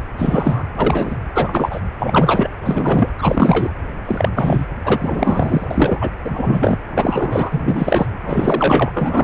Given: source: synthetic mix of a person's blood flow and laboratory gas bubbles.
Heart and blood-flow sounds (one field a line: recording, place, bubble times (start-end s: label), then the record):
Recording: Doppler ultrasound of blood flow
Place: precordium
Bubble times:
0.00-0.02 s: bubbles
0.18-0.63 s: bubbles
0.76-1.16 s: bubbles
1.35-1.80 s: bubbles
1.99-2.51 s: bubbles
2.62-3.10 s: bubbles
3.18-3.73 s: bubbles
4.05-4.66 s: bubbles
4.83-5.68 s: bubbles
5.71-6.10 s: bubbles
6.24-6.78 s: bubbles
6.95-8.06 s: bubbles
8.22-8.91 s: bubbles
8.93-9.24 s: bubbles
From the record:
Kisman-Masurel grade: 343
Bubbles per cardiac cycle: rolling drumbeat, 9 or more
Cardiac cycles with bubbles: 100%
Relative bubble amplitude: loud (0.450 to 0.775)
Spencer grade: 3 (all of the cardiac periods contain showers or single bubble signals, but not dominating or overriding the cardiac motion signals)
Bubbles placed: anywhere in the cardiac cycle